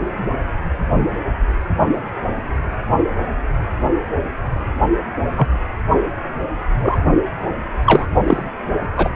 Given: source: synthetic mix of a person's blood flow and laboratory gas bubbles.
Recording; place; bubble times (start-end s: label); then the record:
Doppler ultrasound of blood flow; precordium
5.37-5.48 s: bubbles
6.81-6.97 s: bubbles
7.86-8.05 s: bubbles
8.27-8.43 s: bubbles
8.96-9.09 s: bubbles
From the record:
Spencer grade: 2 (many but less than half of the cardiac periods contain bubble signals, singularly or in groups); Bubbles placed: only in the low amplitude regions of the cardiac cycle